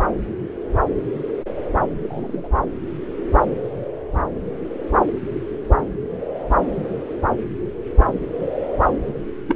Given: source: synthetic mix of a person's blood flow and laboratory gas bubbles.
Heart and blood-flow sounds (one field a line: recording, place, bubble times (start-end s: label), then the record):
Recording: Doppler ultrasound of blood flow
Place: subclavian vein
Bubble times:
2.03-2.48 s: bubbles
9.48-9.55 s: bubbles
From the record:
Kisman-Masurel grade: 122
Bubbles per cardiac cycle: 1 to 2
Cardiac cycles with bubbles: 10 to 50%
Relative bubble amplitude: moderate (0.250 to 0.450)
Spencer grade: 2 (many but less than half of the cardiac periods contain bubble signals, singularly or in groups)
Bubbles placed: anywhere in the cardiac cycle